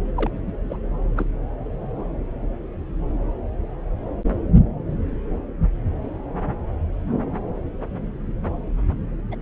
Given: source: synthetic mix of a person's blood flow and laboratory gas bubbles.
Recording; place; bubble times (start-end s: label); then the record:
Doppler ultrasound of blood flow; subclavian vein
0.17-0.31 s: bubbles
0.46-0.53 s: bubbles
0.70-0.76 s: bubbles
1.17-1.29 s: bubbles
9.31-9.35 s: bubbles
From the record:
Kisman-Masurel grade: 221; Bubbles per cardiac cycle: several, 3 to 8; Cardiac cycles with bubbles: 10 to 50%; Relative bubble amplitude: barely perceptible (0.100 to 0.250); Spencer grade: 2 (many but less than half of the cardiac periods contain bubble signals, singularly or in groups); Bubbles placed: anywhere in the cardiac cycle